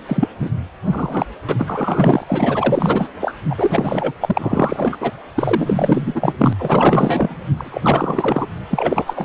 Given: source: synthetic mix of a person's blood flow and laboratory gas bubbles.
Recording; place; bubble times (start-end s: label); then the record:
Doppler ultrasound of blood flow; precordium
0.06-0.28 s: bubbles
0.40-0.49 s: bubbles
0.85-1.26 s: bubbles
1.49-2.25 s: bubbles
2.28-3.08 s: bubbles
3.21-3.34 s: bubbles
3.50-4.12 s: bubbles
4.21-5.11 s: bubbles
5.34-6.53 s: bubbles
6.58-7.44 s: bubbles
7.57-8.49 s: bubbles
8.70-9.25 s: bubbles
From the record:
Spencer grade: 4 (maximum detectable bubble signal sounding continuously throughout systole and diastole of every cardiac period, and overriding the amplitude of the normal cardiac signals); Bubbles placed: anywhere in the cardiac cycle